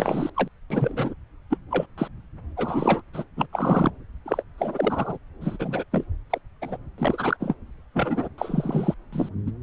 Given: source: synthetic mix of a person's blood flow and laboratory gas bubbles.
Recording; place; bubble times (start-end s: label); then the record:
Doppler ultrasound of blood flow; subclavian vein
0.00-0.30 s: bubbles
0.36-0.48 s: bubbles
0.70-1.14 s: bubbles
1.51-1.57 s: bubbles
1.71-1.86 s: bubbles
1.97-2.08 s: bubbles
2.56-3.01 s: bubbles
3.13-3.23 s: bubbles
3.36-3.46 s: bubbles
3.52-3.90 s: bubbles
4.25-4.42 s: bubbles
4.58-5.17 s: bubbles
5.41-5.57 s: bubbles
5.59-5.83 s: bubbles
5.92-6.04 s: bubbles
6.31-6.39 s: bubbles
6.62-6.77 s: bubbles
6.98-7.37 s: bubbles
7.40-7.54 s: bubbles
7.94-8.29 s: bubbles
8.38-8.94 s: bubbles
9.12-9.29 s: bubbles
9.46-9.50 s: bubbles
From the record:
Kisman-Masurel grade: 242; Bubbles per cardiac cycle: several, 3 to 8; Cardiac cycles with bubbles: 100%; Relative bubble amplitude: moderate (0.250 to 0.450); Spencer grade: 3 (all of the cardiac periods contain showers or single bubble signals, but not dominating or overriding the cardiac motion signals); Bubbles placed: anywhere in the cardiac cycle